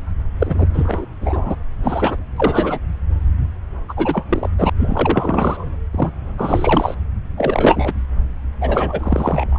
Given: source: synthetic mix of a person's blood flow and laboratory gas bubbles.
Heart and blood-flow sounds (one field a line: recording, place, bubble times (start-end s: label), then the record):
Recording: Doppler ultrasound of blood flow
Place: subclavian vein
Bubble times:
0.40-0.67 s: bubbles
0.73-1.06 s: bubbles
1.21-1.56 s: bubbles
1.83-2.17 s: bubbles
2.36-2.79 s: bubbles
3.88-3.94 s: bubbles
3.96-4.25 s: bubbles
4.29-4.50 s: bubbles
4.58-4.70 s: bubbles
4.79-5.67 s: bubbles
5.92-6.10 s: bubbles
6.38-6.95 s: bubbles
7.37-7.93 s: bubbles
8.60-9.59 s: bubbles
From the record:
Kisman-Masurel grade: 343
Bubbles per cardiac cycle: rolling drumbeat, 9 or more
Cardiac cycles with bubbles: 100%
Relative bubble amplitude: loud (0.450 to 0.775)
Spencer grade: 3 (all of the cardiac periods contain showers or single bubble signals, but not dominating or overriding the cardiac motion signals)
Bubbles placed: anywhere in the cardiac cycle